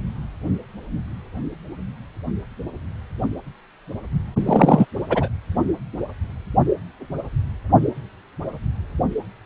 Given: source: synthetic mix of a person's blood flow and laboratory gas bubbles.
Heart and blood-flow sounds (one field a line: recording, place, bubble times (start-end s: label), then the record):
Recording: Doppler ultrasound of blood flow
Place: precordium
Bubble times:
4.46-4.86 s: bubbles
5.10-5.28 s: bubbles
From the record:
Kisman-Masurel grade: 213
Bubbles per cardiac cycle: several, 3 to 8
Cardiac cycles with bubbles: 1 to 10%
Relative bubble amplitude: loud (0.450 to 0.775)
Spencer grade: 1 (occasional bubble signal discernible with the cardiac motion signal, with majority of cardiac periods free of bubbles)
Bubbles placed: only in the low amplitude regions of the cardiac cycle